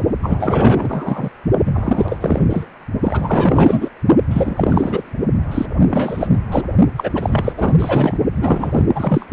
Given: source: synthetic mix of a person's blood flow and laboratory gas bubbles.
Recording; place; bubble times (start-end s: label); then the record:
Doppler ultrasound of blood flow; precordium
0.22-1.30 s: bubbles
1.65-2.45 s: bubbles
2.50-2.66 s: bubbles
3.02-3.89 s: bubbles
4.30-5.10 s: bubbles
5.51-5.66 s: bubbles
5.78-5.85 s: bubbles
5.90-6.30 s: bubbles
6.33-6.38 s: bubbles
6.50-6.65 s: bubbles
6.96-7.10 s: bubbles
7.14-7.52 s: bubbles
7.57-7.73 s: bubbles
7.78-8.18 s: bubbles
8.41-8.86 s: bubbles
8.95-9.25 s: bubbles
From the record:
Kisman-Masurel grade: 444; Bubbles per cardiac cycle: continuous sound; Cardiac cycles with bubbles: 100%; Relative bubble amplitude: maximal (0.775 to 0.999); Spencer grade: 4 (maximum detectable bubble signal sounding continuously throughout systole and diastole of every cardiac period, and overriding the amplitude of the normal cardiac signals); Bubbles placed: only in the low amplitude regions of the cardiac cycle